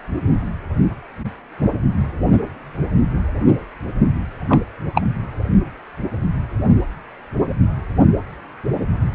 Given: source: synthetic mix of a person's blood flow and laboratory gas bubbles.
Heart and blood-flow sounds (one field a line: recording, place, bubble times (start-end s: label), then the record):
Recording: Doppler ultrasound of blood flow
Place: precordium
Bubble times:
4.47-4.59 s: bubbles
4.95-5.01 s: bubbles
From the record:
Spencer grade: 1 (occasional bubble signal discernible with the cardiac motion signal, with majority of cardiac periods free of bubbles)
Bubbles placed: only in the low amplitude regions of the cardiac cycle